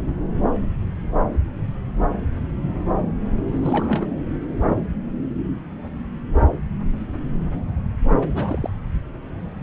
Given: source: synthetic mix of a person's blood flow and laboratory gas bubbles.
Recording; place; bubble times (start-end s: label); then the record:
Doppler ultrasound of blood flow; subclavian vein
3.52-4.06 s: bubbles
8.17-8.69 s: bubbles
From the record:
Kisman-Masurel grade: 211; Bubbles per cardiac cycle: several, 3 to 8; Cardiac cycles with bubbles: 1 to 10%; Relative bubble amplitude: barely perceptible (0.100 to 0.250); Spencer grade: 1 (occasional bubble signal discernible with the cardiac motion signal, with majority of cardiac periods free of bubbles); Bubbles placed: anywhere in the cardiac cycle